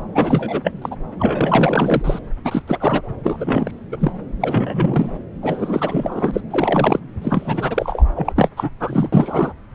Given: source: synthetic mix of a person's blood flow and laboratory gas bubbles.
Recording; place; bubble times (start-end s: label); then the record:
Doppler ultrasound of blood flow; subclavian vein
0.15-0.72 s: bubbles
0.82-0.95 s: bubbles
1.19-2.19 s: bubbles
2.44-2.62 s: bubbles
2.67-3.02 s: bubbles
3.23-3.71 s: bubbles
3.92-3.97 s: bubbles
4.00-4.12 s: bubbles
4.40-5.09 s: bubbles
5.42-6.41 s: bubbles
6.50-7.00 s: bubbles
7.21-8.03 s: bubbles
8.15-8.32 s: bubbles
8.36-8.49 s: bubbles
8.56-8.70 s: bubbles
8.80-9.09 s: bubbles
9.12-9.53 s: bubbles
From the record:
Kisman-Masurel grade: 343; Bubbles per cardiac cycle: rolling drumbeat, 9 or more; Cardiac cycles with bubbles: 100%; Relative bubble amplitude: loud (0.450 to 0.775); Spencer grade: 3 (all of the cardiac periods contain showers or single bubble signals, but not dominating or overriding the cardiac motion signals); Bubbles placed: anywhere in the cardiac cycle